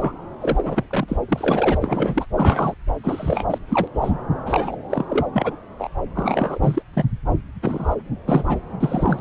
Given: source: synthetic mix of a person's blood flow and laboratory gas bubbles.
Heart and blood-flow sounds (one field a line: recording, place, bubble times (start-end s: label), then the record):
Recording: Doppler ultrasound of blood flow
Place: subclavian vein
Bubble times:
0.00-0.12 s: bubbles
0.41-0.84 s: bubbles
0.90-1.17 s: bubbles
1.28-1.77 s: bubbles
1.80-2.25 s: bubbles
2.35-2.74 s: bubbles
3.04-3.58 s: bubbles
3.68-3.88 s: bubbles
3.94-4.18 s: bubbles
4.46-4.76 s: bubbles
4.89-5.05 s: bubbles
5.09-5.25 s: bubbles
5.33-5.55 s: bubbles
5.79-5.89 s: bubbles
6.15-6.59 s: bubbles
6.62-6.82 s: bubbles
6.93-7.05 s: bubbles
7.62-7.95 s: bubbles
8.28-8.60 s: bubbles
8.80-9.21 s: bubbles
From the record:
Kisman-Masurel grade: 242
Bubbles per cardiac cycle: several, 3 to 8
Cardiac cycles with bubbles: 100%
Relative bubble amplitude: moderate (0.250 to 0.450)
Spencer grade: 3 (all of the cardiac periods contain showers or single bubble signals, but not dominating or overriding the cardiac motion signals)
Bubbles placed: anywhere in the cardiac cycle